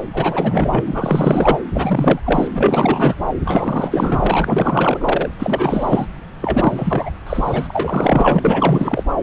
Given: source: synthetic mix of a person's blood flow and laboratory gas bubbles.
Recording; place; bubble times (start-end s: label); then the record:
Doppler ultrasound of blood flow; subclavian vein
0.13-0.83 s: bubbles
0.86-1.58 s: bubbles
1.74-2.20 s: bubbles
2.26-2.48 s: bubbles
2.54-3.16 s: bubbles
3.45-5.32 s: bubbles
5.38-6.07 s: bubbles
6.41-7.11 s: bubbles
7.26-9.03 s: bubbles
From the record:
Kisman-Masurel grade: 444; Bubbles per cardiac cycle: continuous sound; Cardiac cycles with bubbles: 100%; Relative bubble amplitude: maximal (0.775 to 0.999); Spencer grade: 4 (maximum detectable bubble signal sounding continuously throughout systole and diastole of every cardiac period, and overriding the amplitude of the normal cardiac signals); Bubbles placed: anywhere in the cardiac cycle